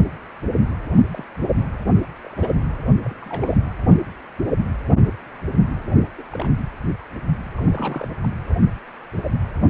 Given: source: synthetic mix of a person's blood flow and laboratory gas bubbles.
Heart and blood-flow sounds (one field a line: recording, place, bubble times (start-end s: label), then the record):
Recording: Doppler ultrasound of blood flow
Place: precordium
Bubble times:
1.14-1.25 s: bubbles
1.41-1.78 s: bubbles
1.95-1.99 s: bubbles
2.23-2.66 s: bubbles
3.04-3.14 s: bubbles
3.22-3.57 s: bubbles
6.17-6.22 s: bubbles
6.31-6.51 s: bubbles
7.56-8.08 s: bubbles
8.18-8.37 s: bubbles
From the record:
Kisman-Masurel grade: 221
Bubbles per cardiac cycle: several, 3 to 8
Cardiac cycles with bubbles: 10 to 50%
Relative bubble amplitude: barely perceptible (0.100 to 0.250)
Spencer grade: 2 (many but less than half of the cardiac periods contain bubble signals, singularly or in groups)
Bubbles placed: anywhere in the cardiac cycle